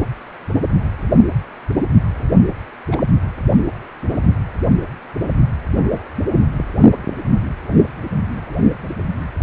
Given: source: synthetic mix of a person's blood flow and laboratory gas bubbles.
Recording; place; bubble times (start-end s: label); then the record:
Doppler ultrasound of blood flow; precordium
2.91-3.06 s: bubbles
From the record:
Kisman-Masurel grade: 111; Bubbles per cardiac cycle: 1 to 2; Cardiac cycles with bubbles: 1 to 10%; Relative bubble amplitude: barely perceptible (0.100 to 0.250); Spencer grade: 1 (occasional bubble signal discernible with the cardiac motion signal, with majority of cardiac periods free of bubbles); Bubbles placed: anywhere in the cardiac cycle